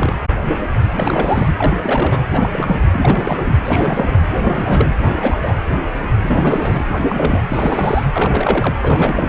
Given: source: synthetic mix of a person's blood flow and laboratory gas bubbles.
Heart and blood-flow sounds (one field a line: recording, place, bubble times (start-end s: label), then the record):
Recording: Doppler ultrasound of blood flow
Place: precordium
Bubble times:
0.00-0.14 s: bubbles
0.94-1.49 s: bubbles
1.57-2.25 s: bubbles
2.29-2.79 s: bubbles
2.92-3.56 s: bubbles
3.63-4.17 s: bubbles
4.35-4.92 s: bubbles
4.98-5.37 s: bubbles
5.42-5.54 s: bubbles
6.24-6.83 s: bubbles
6.88-7.42 s: bubbles
7.49-8.05 s: bubbles
8.12-8.74 s: bubbles
8.82-9.29 s: bubbles
From the record:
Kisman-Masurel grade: 332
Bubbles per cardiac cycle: rolling drumbeat, 9 or more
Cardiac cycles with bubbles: 50 to 99%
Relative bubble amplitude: moderate (0.250 to 0.450)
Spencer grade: 3 (all of the cardiac periods contain showers or single bubble signals, but not dominating or overriding the cardiac motion signals)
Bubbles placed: anywhere in the cardiac cycle